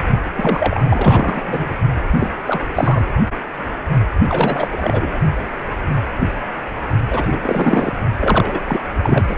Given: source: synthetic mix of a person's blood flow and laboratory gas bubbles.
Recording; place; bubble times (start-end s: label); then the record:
Doppler ultrasound of blood flow; precordium
0.35-0.84 s: bubbles
0.88-1.70 s: bubbles
2.12-2.32 s: bubbles
2.46-2.60 s: bubbles
2.75-3.04 s: bubbles
4.29-4.67 s: bubbles
4.71-5.18 s: bubbles
7.11-7.27 s: bubbles
7.31-7.93 s: bubbles
8.20-8.61 s: bubbles
8.67-8.80 s: bubbles
9.02-9.37 s: bubbles
From the record:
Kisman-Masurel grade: 333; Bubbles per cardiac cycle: rolling drumbeat, 9 or more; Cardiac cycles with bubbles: 50 to 99%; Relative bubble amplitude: loud (0.450 to 0.775); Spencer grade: 3 (all of the cardiac periods contain showers or single bubble signals, but not dominating or overriding the cardiac motion signals); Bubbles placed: only in the low amplitude regions of the cardiac cycle